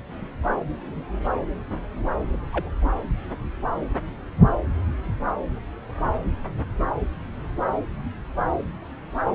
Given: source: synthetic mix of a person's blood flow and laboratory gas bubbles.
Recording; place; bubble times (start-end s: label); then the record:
Doppler ultrasound of blood flow; subclavian vein
2.33-2.40 s: bubbles
2.52-2.69 s: bubbles
2.80-2.93 s: bubbles
From the record:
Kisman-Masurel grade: 211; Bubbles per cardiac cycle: several, 3 to 8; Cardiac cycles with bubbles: 1 to 10%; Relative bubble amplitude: barely perceptible (0.100 to 0.250); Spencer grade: 1 (occasional bubble signal discernible with the cardiac motion signal, with majority of cardiac periods free of bubbles); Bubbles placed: anywhere in the cardiac cycle